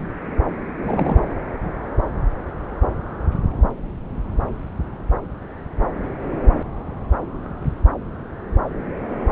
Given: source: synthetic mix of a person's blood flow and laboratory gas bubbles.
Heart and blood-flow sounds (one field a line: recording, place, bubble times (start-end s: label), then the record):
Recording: Doppler ultrasound of blood flow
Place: subclavian vein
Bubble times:
0.84-1.21 s: bubbles
From the record:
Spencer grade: 1 (occasional bubble signal discernible with the cardiac motion signal, with majority of cardiac periods free of bubbles)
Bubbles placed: anywhere in the cardiac cycle